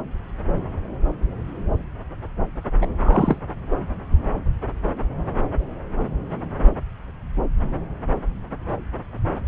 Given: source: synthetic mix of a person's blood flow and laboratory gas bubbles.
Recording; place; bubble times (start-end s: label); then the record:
Doppler ultrasound of blood flow; subclavian vein
2.81-2.87 s: bubbles
3.00-3.39 s: bubbles
From the record:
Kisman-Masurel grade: 212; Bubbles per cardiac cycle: several, 3 to 8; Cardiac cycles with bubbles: 1 to 10%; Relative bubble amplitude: moderate (0.250 to 0.450); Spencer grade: 1 (occasional bubble signal discernible with the cardiac motion signal, with majority of cardiac periods free of bubbles); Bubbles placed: anywhere in the cardiac cycle